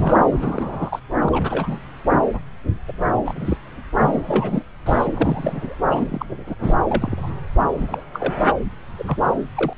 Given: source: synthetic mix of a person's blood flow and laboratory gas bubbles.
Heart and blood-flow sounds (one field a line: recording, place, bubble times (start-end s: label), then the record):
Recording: Doppler ultrasound of blood flow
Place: subclavian vein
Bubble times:
0.00-0.16 s: bubbles
0.32-0.99 s: bubbles
1.19-1.79 s: bubbles
2.10-2.17 s: bubbles
2.33-2.40 s: bubbles
2.88-2.92 s: bubbles
3.25-3.58 s: bubbles
3.99-4.62 s: bubbles
4.86-5.75 s: bubbles
5.91-6.26 s: bubbles
6.46-6.55 s: bubbles
6.63-6.75 s: bubbles
6.88-7.33 s: bubbles
7.69-8.02 s: bubbles
8.13-8.34 s: bubbles
8.45-8.52 s: bubbles
8.98-9.04 s: bubbles
9.07-9.17 s: bubbles
9.55-9.73 s: bubbles
From the record:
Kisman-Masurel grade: 232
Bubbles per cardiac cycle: several, 3 to 8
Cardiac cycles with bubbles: 50 to 99%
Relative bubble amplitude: moderate (0.250 to 0.450)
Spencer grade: 3 (all of the cardiac periods contain showers or single bubble signals, but not dominating or overriding the cardiac motion signals)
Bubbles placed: anywhere in the cardiac cycle